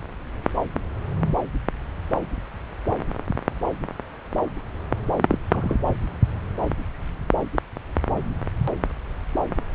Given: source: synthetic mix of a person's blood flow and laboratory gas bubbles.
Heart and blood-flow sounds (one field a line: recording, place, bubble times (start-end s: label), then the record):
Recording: Doppler ultrasound of blood flow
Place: subclavian vein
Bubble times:
5.27-5.38 s: bubbles
5.52-5.75 s: bubbles
From the record:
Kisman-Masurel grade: 112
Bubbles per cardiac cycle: 1 to 2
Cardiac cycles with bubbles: 1 to 10%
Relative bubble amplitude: moderate (0.250 to 0.450)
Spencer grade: 1 (occasional bubble signal discernible with the cardiac motion signal, with majority of cardiac periods free of bubbles)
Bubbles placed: anywhere in the cardiac cycle